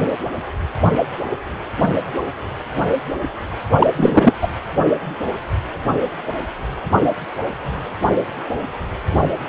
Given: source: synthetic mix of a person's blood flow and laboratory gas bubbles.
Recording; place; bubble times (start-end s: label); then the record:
Doppler ultrasound of blood flow; precordium
3.78-3.87 s: bubbles
3.96-4.33 s: bubbles
4.41-4.49 s: bubbles
From the record:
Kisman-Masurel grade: 213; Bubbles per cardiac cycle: several, 3 to 8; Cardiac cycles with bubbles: 1 to 10%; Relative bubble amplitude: loud (0.450 to 0.775); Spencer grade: 1 (occasional bubble signal discernible with the cardiac motion signal, with majority of cardiac periods free of bubbles); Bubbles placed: only in the low amplitude regions of the cardiac cycle